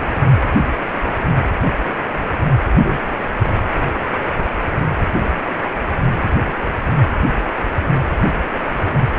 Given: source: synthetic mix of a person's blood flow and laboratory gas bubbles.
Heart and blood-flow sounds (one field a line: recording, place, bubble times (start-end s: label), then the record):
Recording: Doppler ultrasound of blood flow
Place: precordium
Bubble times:
2.72-2.99 s: bubbles
3.44-3.64 s: bubbles
From the record:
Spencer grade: 1 (occasional bubble signal discernible with the cardiac motion signal, with majority of cardiac periods free of bubbles)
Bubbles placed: anywhere in the cardiac cycle